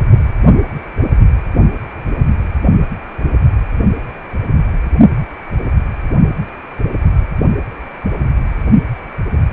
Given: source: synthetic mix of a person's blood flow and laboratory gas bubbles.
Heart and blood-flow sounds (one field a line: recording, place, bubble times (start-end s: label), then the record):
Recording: Doppler ultrasound of blood flow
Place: precordium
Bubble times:
no bubbles
From the record:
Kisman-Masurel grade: 000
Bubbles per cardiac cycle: 0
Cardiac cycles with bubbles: 0%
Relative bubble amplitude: no bubbles discernible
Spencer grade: 0 (complete lack of bubble signals)